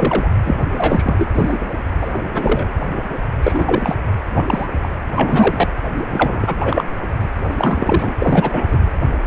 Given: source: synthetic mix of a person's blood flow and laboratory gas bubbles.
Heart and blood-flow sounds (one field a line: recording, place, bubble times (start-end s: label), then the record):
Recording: Doppler ultrasound of blood flow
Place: precordium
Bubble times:
0.00-0.29 s: bubbles
0.45-0.61 s: bubbles
0.77-1.29 s: bubbles
1.35-1.57 s: bubbles
2.01-2.68 s: bubbles
3.43-3.96 s: bubbles
4.34-4.67 s: bubbles
4.82-4.89 s: bubbles
5.15-5.67 s: bubbles
6.10-6.54 s: bubbles
6.60-6.83 s: bubbles
7.46-8.15 s: bubbles
8.19-8.64 s: bubbles
8.67-8.79 s: bubbles
From the record:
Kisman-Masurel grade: 233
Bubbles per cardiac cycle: several, 3 to 8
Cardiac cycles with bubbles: 50 to 99%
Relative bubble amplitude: loud (0.450 to 0.775)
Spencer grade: 3 (all of the cardiac periods contain showers or single bubble signals, but not dominating or overriding the cardiac motion signals)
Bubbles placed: anywhere in the cardiac cycle